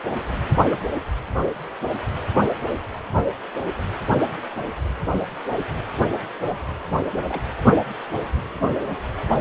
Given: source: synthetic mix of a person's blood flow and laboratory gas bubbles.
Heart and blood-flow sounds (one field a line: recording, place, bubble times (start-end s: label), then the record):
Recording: Doppler ultrasound of blood flow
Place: precordium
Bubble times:
0.65-0.77 s: bubbles
7.14-7.42 s: bubbles
From the record:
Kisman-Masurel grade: 121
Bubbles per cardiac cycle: 1 to 2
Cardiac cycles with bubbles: 10 to 50%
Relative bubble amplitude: barely perceptible (0.100 to 0.250)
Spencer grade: 2 (many but less than half of the cardiac periods contain bubble signals, singularly or in groups)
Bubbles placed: anywhere in the cardiac cycle